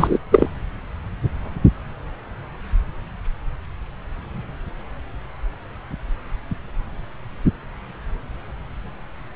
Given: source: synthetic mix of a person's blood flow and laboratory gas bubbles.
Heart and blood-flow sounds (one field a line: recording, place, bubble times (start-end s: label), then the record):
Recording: Doppler ultrasound of blood flow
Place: subclavian vein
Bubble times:
0.00-0.18 s: bubbles
0.31-0.49 s: bubbles
From the record:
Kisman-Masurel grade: 213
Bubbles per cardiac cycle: several, 3 to 8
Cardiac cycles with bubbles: 1 to 10%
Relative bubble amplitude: loud (0.450 to 0.775)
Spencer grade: 1 (occasional bubble signal discernible with the cardiac motion signal, with majority of cardiac periods free of bubbles)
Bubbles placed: anywhere in the cardiac cycle